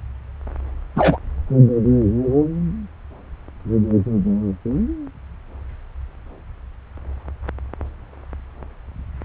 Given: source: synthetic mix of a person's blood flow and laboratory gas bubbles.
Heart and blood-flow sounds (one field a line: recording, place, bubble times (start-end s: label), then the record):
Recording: Doppler ultrasound of blood flow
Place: subclavian vein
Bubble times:
0.96-1.18 s: bubbles
From the record:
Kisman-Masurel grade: 113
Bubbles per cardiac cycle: 1 to 2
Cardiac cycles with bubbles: 1 to 10%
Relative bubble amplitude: loud (0.450 to 0.775)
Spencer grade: 1 (occasional bubble signal discernible with the cardiac motion signal, with majority of cardiac periods free of bubbles)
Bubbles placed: anywhere in the cardiac cycle